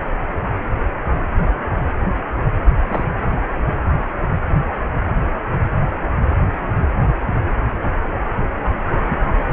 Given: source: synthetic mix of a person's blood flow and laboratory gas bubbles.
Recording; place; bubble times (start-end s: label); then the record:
Doppler ultrasound of blood flow; precordium
2.88-3.10 s: bubbles
9.08-9.17 s: bubbles
From the record:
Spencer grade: 1 (occasional bubble signal discernible with the cardiac motion signal, with majority of cardiac periods free of bubbles); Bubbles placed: anywhere in the cardiac cycle